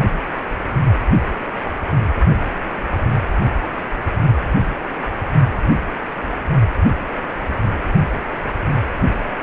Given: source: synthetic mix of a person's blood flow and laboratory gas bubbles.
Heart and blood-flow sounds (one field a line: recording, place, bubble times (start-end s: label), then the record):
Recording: Doppler ultrasound of blood flow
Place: precordium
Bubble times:
no bubbles
From the record:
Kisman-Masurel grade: 000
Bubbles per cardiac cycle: 0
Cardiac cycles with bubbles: 0%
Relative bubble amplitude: no bubbles discernible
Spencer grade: 0 (complete lack of bubble signals)